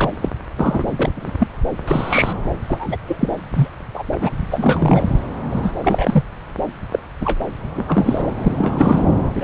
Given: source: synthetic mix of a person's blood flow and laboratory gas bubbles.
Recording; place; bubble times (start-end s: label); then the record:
Doppler ultrasound of blood flow; subclavian vein
0.00-0.13 s: bubbles
0.21-0.29 s: bubbles
0.57-0.86 s: bubbles
0.93-1.12 s: bubbles
1.17-1.31 s: bubbles
1.39-1.47 s: bubbles
1.88-2.33 s: bubbles
2.67-2.97 s: bubbles
3.08-3.28 s: bubbles
3.54-3.68 s: bubbles
3.94-4.03 s: bubbles
4.12-4.17 s: bubbles
4.21-4.31 s: bubbles
4.51-5.08 s: bubbles
5.52-5.73 s: bubbles
5.83-6.24 s: bubbles
6.92-7.00 s: bubbles
7.21-7.42 s: bubbles
7.74-8.31 s: bubbles
8.38-9.06 s: bubbles
9.35-9.44 s: bubbles
From the record:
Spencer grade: 3 (all of the cardiac periods contain showers or single bubble signals, but not dominating or overriding the cardiac motion signals); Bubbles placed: anywhere in the cardiac cycle